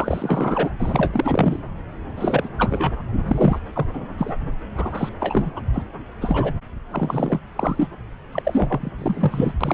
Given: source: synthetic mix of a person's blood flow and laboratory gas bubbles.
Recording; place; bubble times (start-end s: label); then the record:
Doppler ultrasound of blood flow; subclavian vein
0.00-0.70 s: bubbles
0.80-1.10 s: bubbles
1.13-1.59 s: bubbles
2.17-2.49 s: bubbles
2.58-3.03 s: bubbles
3.28-3.59 s: bubbles
3.75-3.86 s: bubbles
3.93-4.05 s: bubbles
4.17-4.33 s: bubbles
4.77-5.09 s: bubbles
5.20-5.62 s: bubbles
5.73-5.83 s: bubbles
6.21-6.52 s: bubbles
6.92-7.40 s: bubbles
7.57-7.88 s: bubbles
8.32-8.90 s: bubbles
8.98-9.54 s: bubbles
9.61-9.74 s: bubbles
From the record:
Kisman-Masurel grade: 342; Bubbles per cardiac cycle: rolling drumbeat, 9 or more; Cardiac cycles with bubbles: 100%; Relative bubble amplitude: moderate (0.250 to 0.450); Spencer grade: 3 (all of the cardiac periods contain showers or single bubble signals, but not dominating or overriding the cardiac motion signals); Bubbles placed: anywhere in the cardiac cycle